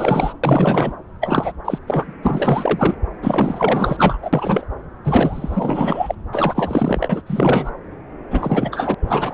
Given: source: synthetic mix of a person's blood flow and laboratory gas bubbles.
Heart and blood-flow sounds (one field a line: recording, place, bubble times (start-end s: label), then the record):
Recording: Doppler ultrasound of blood flow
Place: subclavian vein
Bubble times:
0.00-0.33 s: bubbles
0.43-0.96 s: bubbles
1.21-1.52 s: bubbles
1.65-1.78 s: bubbles
1.87-2.14 s: bubbles
2.23-2.95 s: bubbles
3.22-4.18 s: bubbles
4.22-4.65 s: bubbles
5.04-6.15 s: bubbles
6.32-7.23 s: bubbles
7.26-7.71 s: bubbles
8.30-8.95 s: bubbles
9.01-9.34 s: bubbles
From the record:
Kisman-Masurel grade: 444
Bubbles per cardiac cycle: continuous sound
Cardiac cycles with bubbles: 100%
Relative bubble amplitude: maximal (0.775 to 0.999)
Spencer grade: 4 (maximum detectable bubble signal sounding continuously throughout systole and diastole of every cardiac period, and overriding the amplitude of the normal cardiac signals)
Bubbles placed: anywhere in the cardiac cycle